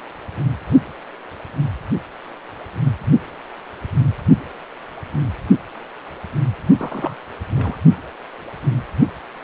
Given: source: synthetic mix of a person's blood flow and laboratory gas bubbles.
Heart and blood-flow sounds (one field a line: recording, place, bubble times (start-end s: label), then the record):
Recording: Doppler ultrasound of blood flow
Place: precordium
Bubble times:
6.79-7.16 s: bubbles
7.54-7.78 s: bubbles
From the record:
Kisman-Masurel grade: 211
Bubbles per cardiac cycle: several, 3 to 8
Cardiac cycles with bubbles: 1 to 10%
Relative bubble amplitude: barely perceptible (0.100 to 0.250)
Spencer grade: 1 (occasional bubble signal discernible with the cardiac motion signal, with majority of cardiac periods free of bubbles)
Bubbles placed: only in the low amplitude regions of the cardiac cycle